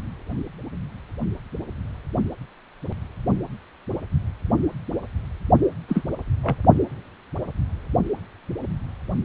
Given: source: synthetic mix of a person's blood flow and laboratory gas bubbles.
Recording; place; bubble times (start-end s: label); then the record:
Doppler ultrasound of blood flow; precordium
5.88-6.03 s: bubbles
6.43-6.57 s: bubbles
From the record:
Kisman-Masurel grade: 122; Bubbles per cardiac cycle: 1 to 2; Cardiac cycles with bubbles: 10 to 50%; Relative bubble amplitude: moderate (0.250 to 0.450); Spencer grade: 2 (many but less than half of the cardiac periods contain bubble signals, singularly or in groups); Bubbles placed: only in the low amplitude regions of the cardiac cycle